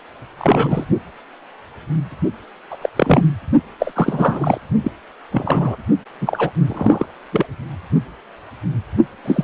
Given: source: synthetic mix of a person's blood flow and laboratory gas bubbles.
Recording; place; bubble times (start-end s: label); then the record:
Doppler ultrasound of blood flow; precordium
0.38-0.85 s: bubbles
2.71-2.77 s: bubbles
2.81-2.90 s: bubbles
2.96-3.23 s: bubbles
3.79-3.92 s: bubbles
3.96-4.57 s: bubbles
4.83-4.92 s: bubbles
5.31-5.76 s: bubbles
6.21-6.50 s: bubbles
6.67-7.06 s: bubbles
7.32-7.46 s: bubbles
9.24-9.44 s: bubbles
From the record:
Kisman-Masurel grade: 233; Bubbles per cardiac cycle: several, 3 to 8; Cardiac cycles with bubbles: 50 to 99%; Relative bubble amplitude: loud (0.450 to 0.775); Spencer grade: 3 (all of the cardiac periods contain showers or single bubble signals, but not dominating or overriding the cardiac motion signals); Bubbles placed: only in the low amplitude regions of the cardiac cycle